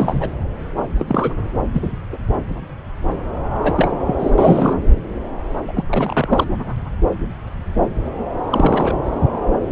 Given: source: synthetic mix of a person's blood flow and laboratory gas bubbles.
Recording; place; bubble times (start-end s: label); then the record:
Doppler ultrasound of blood flow; subclavian vein
0.00-0.30 s: bubbles
0.97-1.32 s: bubbles
1.73-1.96 s: bubbles
2.12-2.17 s: bubbles
3.63-3.90 s: bubbles
4.06-4.16 s: bubbles
4.19-4.31 s: bubbles
4.38-4.74 s: bubbles
5.67-5.84 s: bubbles
5.88-6.46 s: bubbles
8.50-8.97 s: bubbles
From the record:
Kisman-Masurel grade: 232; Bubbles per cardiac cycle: several, 3 to 8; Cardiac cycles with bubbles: 50 to 99%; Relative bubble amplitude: moderate (0.250 to 0.450); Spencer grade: 3 (all of the cardiac periods contain showers or single bubble signals, but not dominating or overriding the cardiac motion signals); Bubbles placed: anywhere in the cardiac cycle